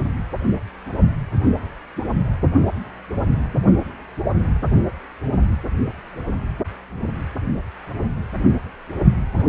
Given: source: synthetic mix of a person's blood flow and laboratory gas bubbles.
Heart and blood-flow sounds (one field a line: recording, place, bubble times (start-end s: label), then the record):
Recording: Doppler ultrasound of blood flow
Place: precordium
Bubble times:
9.37-9.46 s: bubbles
From the record:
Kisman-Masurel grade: 211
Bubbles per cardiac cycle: several, 3 to 8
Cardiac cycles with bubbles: 1 to 10%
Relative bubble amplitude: barely perceptible (0.100 to 0.250)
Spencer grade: 1 (occasional bubble signal discernible with the cardiac motion signal, with majority of cardiac periods free of bubbles)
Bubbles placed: anywhere in the cardiac cycle